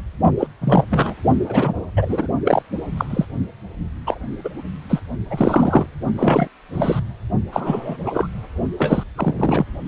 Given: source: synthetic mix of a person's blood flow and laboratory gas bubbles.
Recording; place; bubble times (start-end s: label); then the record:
Doppler ultrasound of blood flow; precordium
0.38-0.47 s: bubbles
0.61-0.84 s: bubbles
0.91-1.15 s: bubbles
1.48-1.73 s: bubbles
1.97-2.27 s: bubbles
2.45-2.62 s: bubbles
2.97-3.05 s: bubbles
3.10-3.25 s: bubbles
4.06-4.18 s: bubbles
4.44-4.50 s: bubbles
4.89-5.00 s: bubbles
5.30-5.86 s: bubbles
6.17-6.47 s: bubbles
6.73-7.00 s: bubbles
7.52-7.97 s: bubbles
8.04-8.27 s: bubbles
8.78-9.04 s: bubbles
9.16-9.64 s: bubbles
From the record:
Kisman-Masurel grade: 242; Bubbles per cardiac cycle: several, 3 to 8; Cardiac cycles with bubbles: 100%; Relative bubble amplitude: moderate (0.250 to 0.450); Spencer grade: 3 (all of the cardiac periods contain showers or single bubble signals, but not dominating or overriding the cardiac motion signals); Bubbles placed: only in the low amplitude regions of the cardiac cycle